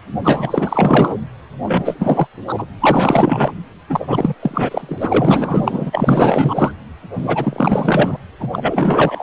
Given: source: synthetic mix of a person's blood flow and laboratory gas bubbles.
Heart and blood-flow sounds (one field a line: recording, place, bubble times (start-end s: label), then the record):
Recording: Doppler ultrasound of blood flow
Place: precordium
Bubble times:
0.24-1.16 s: bubbles
1.65-2.27 s: bubbles
2.47-2.66 s: bubbles
2.80-3.53 s: bubbles
3.89-4.34 s: bubbles
4.40-6.71 s: bubbles
7.15-8.17 s: bubbles
8.39-8.48 s: bubbles
8.52-9.23 s: bubbles
From the record:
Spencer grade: 4 (maximum detectable bubble signal sounding continuously throughout systole and diastole of every cardiac period, and overriding the amplitude of the normal cardiac signals)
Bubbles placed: anywhere in the cardiac cycle